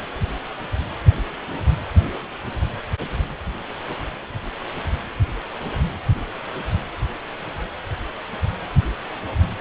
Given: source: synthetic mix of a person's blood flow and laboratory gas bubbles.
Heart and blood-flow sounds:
Doppler ultrasound of blood flow; precordium
no bubbles
From the record:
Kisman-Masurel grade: 000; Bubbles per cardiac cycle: 0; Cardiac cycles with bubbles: 0%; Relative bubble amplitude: no bubbles discernible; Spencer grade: 0 (complete lack of bubble signals)

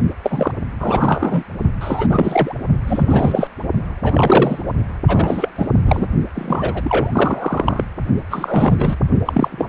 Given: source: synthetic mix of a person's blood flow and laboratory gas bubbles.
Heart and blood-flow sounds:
Doppler ultrasound of blood flow; precordium
0.23-0.51 s: bubbles
0.80-1.44 s: bubbles
1.80-2.07 s: bubbles
2.09-2.55 s: bubbles
2.86-3.48 s: bubbles
4.02-4.63 s: bubbles
5.07-5.49 s: bubbles
5.55-5.67 s: bubbles
5.85-6.08 s: bubbles
6.35-7.84 s: bubbles
8.30-8.97 s: bubbles
9.25-9.69 s: bubbles
From the record:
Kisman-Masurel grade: 343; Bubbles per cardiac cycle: rolling drumbeat, 9 or more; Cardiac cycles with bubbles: 100%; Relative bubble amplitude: loud (0.450 to 0.775); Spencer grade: 3 (all of the cardiac periods contain showers or single bubble signals, but not dominating or overriding the cardiac motion signals); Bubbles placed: only in the low amplitude regions of the cardiac cycle

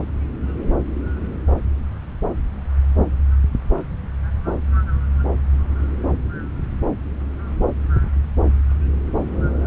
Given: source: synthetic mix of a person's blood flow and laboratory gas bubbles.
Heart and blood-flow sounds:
Doppler ultrasound of blood flow; subclavian vein
no bubbles
From the record:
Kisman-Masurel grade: 000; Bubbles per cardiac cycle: 0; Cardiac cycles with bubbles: 0%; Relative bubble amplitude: no bubbles discernible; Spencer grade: 0 (complete lack of bubble signals)

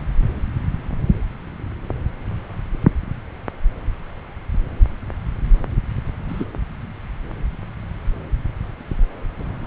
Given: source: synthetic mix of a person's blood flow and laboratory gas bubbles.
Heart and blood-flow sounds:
Doppler ultrasound of blood flow; subclavian vein
6.27-6.45 s: bubbles
From the record:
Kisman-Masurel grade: 112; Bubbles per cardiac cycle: 1 to 2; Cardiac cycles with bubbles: 1 to 10%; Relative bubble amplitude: moderate (0.250 to 0.450); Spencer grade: 1 (occasional bubble signal discernible with the cardiac motion signal, with majority of cardiac periods free of bubbles); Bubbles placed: anywhere in the cardiac cycle

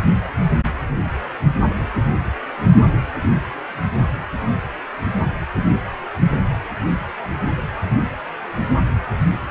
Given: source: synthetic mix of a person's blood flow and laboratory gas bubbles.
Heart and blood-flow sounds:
Doppler ultrasound of blood flow; precordium
no bubbles
From the record:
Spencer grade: 0 (complete lack of bubble signals)

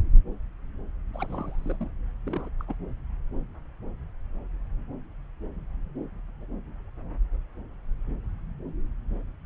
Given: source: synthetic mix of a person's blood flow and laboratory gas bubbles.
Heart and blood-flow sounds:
Doppler ultrasound of blood flow; subclavian vein
1.14-1.88 s: bubbles
2.24-2.49 s: bubbles
2.59-2.65 s: bubbles
2.68-2.74 s: bubbles
From the record:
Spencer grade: 2 (many but less than half of the cardiac periods contain bubble signals, singularly or in groups); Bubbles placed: anywhere in the cardiac cycle

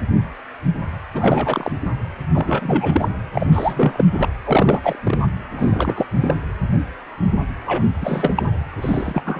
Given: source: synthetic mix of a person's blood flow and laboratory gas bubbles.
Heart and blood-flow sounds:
Doppler ultrasound of blood flow; precordium
1.14-1.72 s: bubbles
1.85-1.91 s: bubbles
2.33-3.08 s: bubbles
3.33-3.47 s: bubbles
3.52-4.04 s: bubbles
4.13-4.29 s: bubbles
4.45-4.80 s: bubbles
4.83-4.96 s: bubbles
5.04-5.19 s: bubbles
5.57-6.07 s: bubbles
6.20-6.34 s: bubbles
7.66-7.83 s: bubbles
8.00-8.50 s: bubbles
8.81-9.22 s: bubbles
9.25-9.40 s: bubbles
From the record:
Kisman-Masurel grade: 333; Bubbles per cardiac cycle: rolling drumbeat, 9 or more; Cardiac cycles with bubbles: 50 to 99%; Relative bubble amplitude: loud (0.450 to 0.775); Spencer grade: 3 (all of the cardiac periods contain showers or single bubble signals, but not dominating or overriding the cardiac motion signals); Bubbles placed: anywhere in the cardiac cycle

